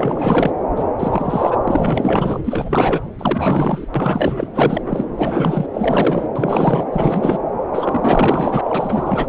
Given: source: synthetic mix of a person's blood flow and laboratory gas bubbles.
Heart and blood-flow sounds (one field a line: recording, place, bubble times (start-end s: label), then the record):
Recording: Doppler ultrasound of blood flow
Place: subclavian vein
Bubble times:
0.00-0.53 s: bubbles
0.76-0.83 s: bubbles
0.99-1.57 s: bubbles
1.64-2.41 s: bubbles
2.44-3.01 s: bubbles
3.18-3.86 s: bubbles
3.94-4.47 s: bubbles
4.54-4.82 s: bubbles
4.86-5.05 s: bubbles
5.17-5.67 s: bubbles
5.74-6.28 s: bubbles
6.36-6.85 s: bubbles
6.92-7.38 s: bubbles
7.73-9.27 s: bubbles
From the record:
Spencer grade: 4 (maximum detectable bubble signal sounding continuously throughout systole and diastole of every cardiac period, and overriding the amplitude of the normal cardiac signals)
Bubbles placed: anywhere in the cardiac cycle